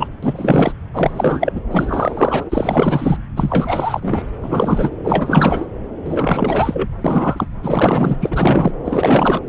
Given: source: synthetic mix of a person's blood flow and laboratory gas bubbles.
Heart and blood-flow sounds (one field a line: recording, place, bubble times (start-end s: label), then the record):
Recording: Doppler ultrasound of blood flow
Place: subclavian vein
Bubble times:
0.00-0.08 s: bubbles
0.23-0.73 s: bubbles
0.93-1.53 s: bubbles
1.55-1.60 s: bubbles
1.71-2.44 s: bubbles
2.49-3.17 s: bubbles
3.36-4.25 s: bubbles
4.41-4.90 s: bubbles
5.03-5.68 s: bubbles
6.04-6.89 s: bubbles
7.04-7.47 s: bubbles
7.62-8.17 s: bubbles
8.21-8.73 s: bubbles
8.85-9.41 s: bubbles
From the record:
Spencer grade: 4 (maximum detectable bubble signal sounding continuously throughout systole and diastole of every cardiac period, and overriding the amplitude of the normal cardiac signals)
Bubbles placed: anywhere in the cardiac cycle